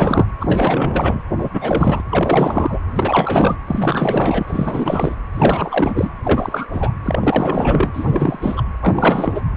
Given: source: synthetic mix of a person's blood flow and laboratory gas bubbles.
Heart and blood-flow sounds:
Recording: Doppler ultrasound of blood flow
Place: precordium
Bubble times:
0.00-0.26 s: bubbles
0.40-1.23 s: bubbles
1.38-1.49 s: bubbles
1.53-2.03 s: bubbles
2.10-2.79 s: bubbles
2.96-3.57 s: bubbles
3.67-5.17 s: bubbles
5.34-6.10 s: bubbles
6.23-6.67 s: bubbles
6.72-6.94 s: bubbles
7.03-8.64 s: bubbles
8.81-9.42 s: bubbles
From the record:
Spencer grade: 4 (maximum detectable bubble signal sounding continuously throughout systole and diastole of every cardiac period, and overriding the amplitude of the normal cardiac signals)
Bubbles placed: anywhere in the cardiac cycle

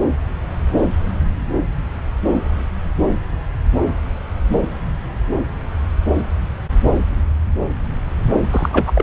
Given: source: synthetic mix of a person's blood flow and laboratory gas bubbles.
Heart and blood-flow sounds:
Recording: Doppler ultrasound of blood flow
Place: subclavian vein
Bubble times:
8.50-8.92 s: bubbles
8.95-9.02 s: bubbles
From the record:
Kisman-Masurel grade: 212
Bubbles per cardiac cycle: several, 3 to 8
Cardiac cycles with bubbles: 1 to 10%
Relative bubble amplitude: moderate (0.250 to 0.450)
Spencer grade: 1 (occasional bubble signal discernible with the cardiac motion signal, with majority of cardiac periods free of bubbles)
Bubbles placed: anywhere in the cardiac cycle

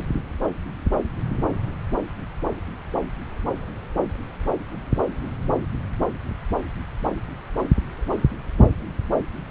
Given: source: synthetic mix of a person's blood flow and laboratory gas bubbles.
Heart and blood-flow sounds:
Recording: Doppler ultrasound of blood flow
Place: subclavian vein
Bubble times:
no bubbles
From the record:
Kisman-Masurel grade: 000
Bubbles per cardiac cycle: 0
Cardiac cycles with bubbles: 0%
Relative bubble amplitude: no bubbles discernible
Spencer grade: 0 (complete lack of bubble signals)

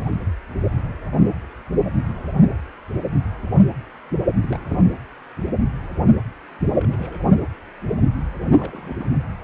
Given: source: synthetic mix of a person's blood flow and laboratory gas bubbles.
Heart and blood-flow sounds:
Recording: Doppler ultrasound of blood flow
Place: precordium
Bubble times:
4.41-4.93 s: bubbles
6.79-7.31 s: bubbles
8.53-9.07 s: bubbles
From the record:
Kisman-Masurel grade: 221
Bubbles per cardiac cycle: several, 3 to 8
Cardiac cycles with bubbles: 10 to 50%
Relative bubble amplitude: barely perceptible (0.100 to 0.250)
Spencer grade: 2 (many but less than half of the cardiac periods contain bubble signals, singularly or in groups)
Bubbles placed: anywhere in the cardiac cycle

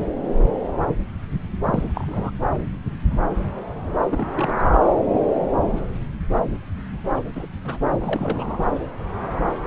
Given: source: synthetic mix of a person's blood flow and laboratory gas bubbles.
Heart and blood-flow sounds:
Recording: Doppler ultrasound of blood flow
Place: subclavian vein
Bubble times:
1.65-2.30 s: bubbles
4.12-4.26 s: bubbles
4.35-4.54 s: bubbles
4.58-4.63 s: bubbles
7.15-7.25 s: bubbles
7.35-7.46 s: bubbles
7.64-7.79 s: bubbles
7.96-8.58 s: bubbles
From the record:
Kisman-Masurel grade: 221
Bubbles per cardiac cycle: several, 3 to 8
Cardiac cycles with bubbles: 10 to 50%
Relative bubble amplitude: barely perceptible (0.100 to 0.250)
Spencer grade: 2 (many but less than half of the cardiac periods contain bubble signals, singularly or in groups)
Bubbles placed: anywhere in the cardiac cycle

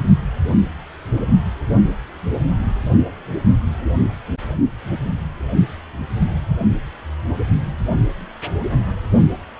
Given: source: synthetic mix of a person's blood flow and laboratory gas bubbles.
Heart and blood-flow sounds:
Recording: Doppler ultrasound of blood flow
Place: precordium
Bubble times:
no bubbles
From the record:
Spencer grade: 0 (complete lack of bubble signals)

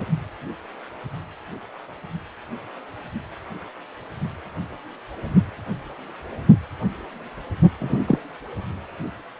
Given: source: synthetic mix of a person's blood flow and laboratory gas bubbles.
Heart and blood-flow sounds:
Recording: Doppler ultrasound of blood flow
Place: precordium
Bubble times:
7.79-7.99 s: bubbles
8.06-8.19 s: bubbles
From the record:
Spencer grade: 1 (occasional bubble signal discernible with the cardiac motion signal, with majority of cardiac periods free of bubbles)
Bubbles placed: anywhere in the cardiac cycle

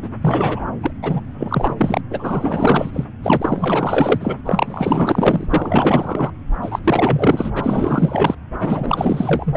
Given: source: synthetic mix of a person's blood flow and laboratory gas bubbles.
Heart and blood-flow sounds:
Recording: Doppler ultrasound of blood flow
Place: subclavian vein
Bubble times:
0.00-0.09 s: bubbles
0.22-0.59 s: bubbles
0.82-0.91 s: bubbles
1.02-1.20 s: bubbles
1.38-1.74 s: bubbles
1.77-2.01 s: bubbles
2.10-3.05 s: bubbles
3.22-4.37 s: bubbles
4.46-5.47 s: bubbles
5.50-6.31 s: bubbles
6.62-6.79 s: bubbles
6.83-7.50 s: bubbles
7.54-8.35 s: bubbles
8.60-9.57 s: bubbles
From the record:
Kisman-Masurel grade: 444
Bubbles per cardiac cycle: continuous sound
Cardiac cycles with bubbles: 100%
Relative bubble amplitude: maximal (0.775 to 0.999)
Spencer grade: 4 (maximum detectable bubble signal sounding continuously throughout systole and diastole of every cardiac period, and overriding the amplitude of the normal cardiac signals)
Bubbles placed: anywhere in the cardiac cycle

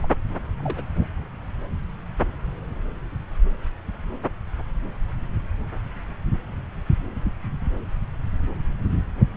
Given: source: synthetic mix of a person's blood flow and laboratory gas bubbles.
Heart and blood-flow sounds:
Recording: Doppler ultrasound of blood flow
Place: subclavian vein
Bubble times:
0.02-0.08 s: bubbles
0.63-0.84 s: bubbles
0.96-1.08 s: bubbles
From the record:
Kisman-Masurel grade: 211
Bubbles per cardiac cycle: several, 3 to 8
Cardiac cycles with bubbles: 1 to 10%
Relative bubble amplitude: barely perceptible (0.100 to 0.250)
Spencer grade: 1 (occasional bubble signal discernible with the cardiac motion signal, with majority of cardiac periods free of bubbles)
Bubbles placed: anywhere in the cardiac cycle

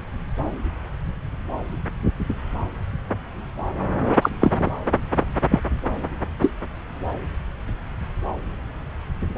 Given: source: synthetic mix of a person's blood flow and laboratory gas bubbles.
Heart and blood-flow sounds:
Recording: Doppler ultrasound of blood flow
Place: subclavian vein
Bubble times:
4.22-4.29 s: bubbles
4.40-4.72 s: bubbles
5.49-5.60 s: bubbles
6.41-6.50 s: bubbles
From the record:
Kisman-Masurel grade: 123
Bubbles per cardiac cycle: 1 to 2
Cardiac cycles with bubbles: 10 to 50%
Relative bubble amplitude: loud (0.450 to 0.775)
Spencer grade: 2 (many but less than half of the cardiac periods contain bubble signals, singularly or in groups)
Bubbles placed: anywhere in the cardiac cycle

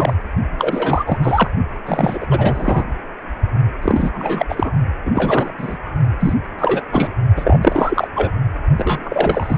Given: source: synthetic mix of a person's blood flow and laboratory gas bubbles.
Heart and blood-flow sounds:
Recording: Doppler ultrasound of blood flow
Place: precordium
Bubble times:
0.00-0.13 s: bubbles
0.57-1.18 s: bubbles
1.22-1.51 s: bubbles
1.86-2.85 s: bubbles
3.82-4.10 s: bubbles
4.14-4.46 s: bubbles
4.49-4.71 s: bubbles
5.05-5.12 s: bubbles
5.14-5.53 s: bubbles
5.58-5.77 s: bubbles
6.20-6.33 s: bubbles
6.58-6.83 s: bubbles
6.91-7.10 s: bubbles
7.36-7.59 s: bubbles
7.62-8.08 s: bubbles
8.15-8.31 s: bubbles
8.77-9.58 s: bubbles
From the record:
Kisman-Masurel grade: 333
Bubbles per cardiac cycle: rolling drumbeat, 9 or more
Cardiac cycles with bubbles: 50 to 99%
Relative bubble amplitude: loud (0.450 to 0.775)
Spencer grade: 3 (all of the cardiac periods contain showers or single bubble signals, but not dominating or overriding the cardiac motion signals)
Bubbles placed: only in the low amplitude regions of the cardiac cycle

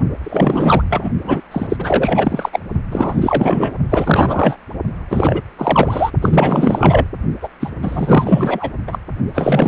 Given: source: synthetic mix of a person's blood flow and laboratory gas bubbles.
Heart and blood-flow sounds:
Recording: Doppler ultrasound of blood flow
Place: precordium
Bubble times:
0.23-0.82 s: bubbles
0.90-1.09 s: bubbles
1.24-1.42 s: bubbles
1.51-2.49 s: bubbles
2.52-2.60 s: bubbles
2.90-3.73 s: bubbles
3.90-4.57 s: bubbles
5.10-5.42 s: bubbles
5.58-6.11 s: bubbles
6.21-7.07 s: bubbles
7.41-7.49 s: bubbles
7.61-7.71 s: bubbles
7.82-8.71 s: bubbles
8.87-8.98 s: bubbles
9.33-9.68 s: bubbles
From the record:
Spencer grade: 4 (maximum detectable bubble signal sounding continuously throughout systole and diastole of every cardiac period, and overriding the amplitude of the normal cardiac signals)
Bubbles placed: only in the low amplitude regions of the cardiac cycle

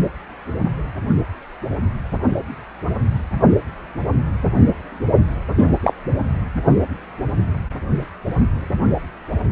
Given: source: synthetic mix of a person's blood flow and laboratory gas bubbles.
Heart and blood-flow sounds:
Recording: Doppler ultrasound of blood flow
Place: precordium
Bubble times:
5.57-5.72 s: bubbles
5.82-5.93 s: bubbles
From the record:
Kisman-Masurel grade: 113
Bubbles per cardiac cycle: 1 to 2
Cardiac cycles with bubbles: 1 to 10%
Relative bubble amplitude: loud (0.450 to 0.775)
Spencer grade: 1 (occasional bubble signal discernible with the cardiac motion signal, with majority of cardiac periods free of bubbles)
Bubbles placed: anywhere in the cardiac cycle

